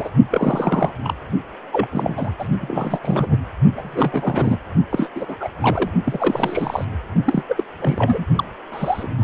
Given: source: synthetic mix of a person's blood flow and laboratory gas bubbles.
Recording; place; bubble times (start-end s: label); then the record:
Doppler ultrasound of blood flow; precordium
0.00-0.09 s: bubbles
0.30-0.93 s: bubbles
1.04-1.14 s: bubbles
1.73-1.88 s: bubbles
1.90-2.33 s: bubbles
2.39-2.48 s: bubbles
2.61-2.99 s: bubbles
3.02-3.39 s: bubbles
3.77-4.59 s: bubbles
4.90-5.09 s: bubbles
5.15-5.26 s: bubbles
5.28-5.36 s: bubbles
5.39-5.50 s: bubbles
5.61-5.90 s: bubbles
6.04-6.85 s: bubbles
7.24-7.44 s: bubbles
7.48-7.63 s: bubbles
7.80-8.25 s: bubbles
8.36-8.45 s: bubbles
8.72-9.07 s: bubbles
9.21-9.24 s: bubbles
From the record:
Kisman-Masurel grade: 342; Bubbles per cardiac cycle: rolling drumbeat, 9 or more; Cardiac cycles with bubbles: 100%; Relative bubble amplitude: moderate (0.250 to 0.450); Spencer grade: 3 (all of the cardiac periods contain showers or single bubble signals, but not dominating or overriding the cardiac motion signals); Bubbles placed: only in the low amplitude regions of the cardiac cycle